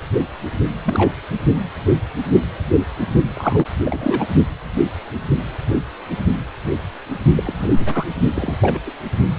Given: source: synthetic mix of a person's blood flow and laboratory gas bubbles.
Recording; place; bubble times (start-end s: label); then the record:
Doppler ultrasound of blood flow; precordium
0.83-1.09 s: bubbles
3.35-3.65 s: bubbles
3.85-4.28 s: bubbles
7.36-7.68 s: bubbles
7.71-8.06 s: bubbles
8.35-8.57 s: bubbles
8.60-8.79 s: bubbles
8.86-8.91 s: bubbles
From the record:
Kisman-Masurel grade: 232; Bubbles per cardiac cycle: several, 3 to 8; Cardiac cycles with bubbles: 50 to 99%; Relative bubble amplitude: moderate (0.250 to 0.450); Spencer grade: 3 (all of the cardiac periods contain showers or single bubble signals, but not dominating or overriding the cardiac motion signals); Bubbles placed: only in the low amplitude regions of the cardiac cycle